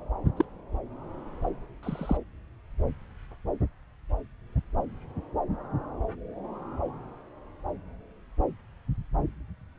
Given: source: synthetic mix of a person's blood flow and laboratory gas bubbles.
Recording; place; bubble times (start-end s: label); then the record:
Doppler ultrasound of blood flow; subclavian vein
0.37-0.44 s: bubbles
1.82-2.17 s: bubbles
From the record:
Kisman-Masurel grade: 121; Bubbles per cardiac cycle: 1 to 2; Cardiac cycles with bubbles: 10 to 50%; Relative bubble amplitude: barely perceptible (0.100 to 0.250); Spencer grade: 2 (many but less than half of the cardiac periods contain bubble signals, singularly or in groups); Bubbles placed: anywhere in the cardiac cycle